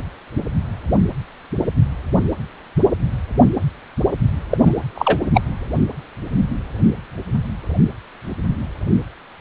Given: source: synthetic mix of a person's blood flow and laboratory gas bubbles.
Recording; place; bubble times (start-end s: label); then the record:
Doppler ultrasound of blood flow; precordium
4.50-4.58 s: bubbles
4.63-4.72 s: bubbles
4.95-5.20 s: bubbles
5.33-5.42 s: bubbles
From the record:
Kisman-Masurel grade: 223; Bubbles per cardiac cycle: several, 3 to 8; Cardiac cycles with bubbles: 10 to 50%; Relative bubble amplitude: loud (0.450 to 0.775); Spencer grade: 2 (many but less than half of the cardiac periods contain bubble signals, singularly or in groups); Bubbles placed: anywhere in the cardiac cycle